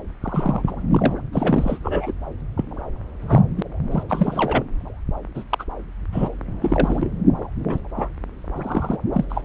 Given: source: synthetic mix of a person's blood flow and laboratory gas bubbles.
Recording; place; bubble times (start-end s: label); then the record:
Doppler ultrasound of blood flow; subclavian vein
0.22-0.62 s: bubbles
0.67-0.71 s: bubbles
0.91-1.14 s: bubbles
1.32-1.78 s: bubbles
1.83-2.13 s: bubbles
2.57-2.65 s: bubbles
3.21-3.42 s: bubbles
3.57-3.62 s: bubbles
3.91-4.03 s: bubbles
4.09-4.63 s: bubbles
5.34-5.43 s: bubbles
5.50-5.64 s: bubbles
6.12-6.29 s: bubbles
6.61-7.12 s: bubbles
7.67-7.79 s: bubbles
7.96-8.08 s: bubbles
8.56-8.96 s: bubbles
9.12-9.25 s: bubbles
9.29-9.41 s: bubbles
From the record:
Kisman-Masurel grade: 242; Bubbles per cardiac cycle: several, 3 to 8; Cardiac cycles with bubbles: 100%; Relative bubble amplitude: moderate (0.250 to 0.450); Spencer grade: 3 (all of the cardiac periods contain showers or single bubble signals, but not dominating or overriding the cardiac motion signals); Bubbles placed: anywhere in the cardiac cycle